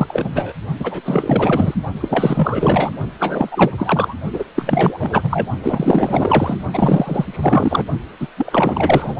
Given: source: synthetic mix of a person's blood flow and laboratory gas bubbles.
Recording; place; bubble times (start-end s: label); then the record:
Doppler ultrasound of blood flow; precordium
0.00-0.53 s: bubbles
0.79-1.01 s: bubbles
1.05-1.75 s: bubbles
2.00-2.92 s: bubbles
3.19-4.15 s: bubbles
4.32-4.45 s: bubbles
4.55-5.47 s: bubbles
5.61-6.58 s: bubbles
6.72-7.84 s: bubbles
8.20-8.28 s: bubbles
8.37-9.16 s: bubbles
From the record:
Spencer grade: 4 (maximum detectable bubble signal sounding continuously throughout systole and diastole of every cardiac period, and overriding the amplitude of the normal cardiac signals); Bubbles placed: only in the low amplitude regions of the cardiac cycle